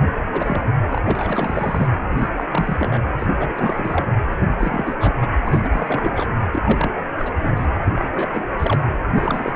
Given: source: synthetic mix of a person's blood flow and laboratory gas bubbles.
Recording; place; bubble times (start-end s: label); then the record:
Doppler ultrasound of blood flow; precordium
0.15-0.29 s: bubbles
0.33-0.61 s: bubbles
0.89-1.88 s: bubbles
2.10-2.29 s: bubbles
2.36-2.44 s: bubbles
2.49-2.99 s: bubbles
3.19-3.27 s: bubbles
3.40-4.06 s: bubbles
4.32-4.37 s: bubbles
4.40-4.47 s: bubbles
4.57-4.94 s: bubbles
5.00-5.13 s: bubbles
5.21-5.29 s: bubbles
5.46-5.69 s: bubbles
5.72-6.30 s: bubbles
6.51-6.62 s: bubbles
6.65-6.92 s: bubbles
7.19-7.32 s: bubbles
7.36-7.53 s: bubbles
7.56-7.67 s: bubbles
7.85-8.08 s: bubbles
8.14-8.44 s: bubbles
8.58-8.83 s: bubbles
9.15-9.53 s: bubbles
From the record:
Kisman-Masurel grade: 342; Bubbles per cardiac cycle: rolling drumbeat, 9 or more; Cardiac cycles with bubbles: 100%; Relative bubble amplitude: moderate (0.250 to 0.450); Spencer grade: 3 (all of the cardiac periods contain showers or single bubble signals, but not dominating or overriding the cardiac motion signals); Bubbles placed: anywhere in the cardiac cycle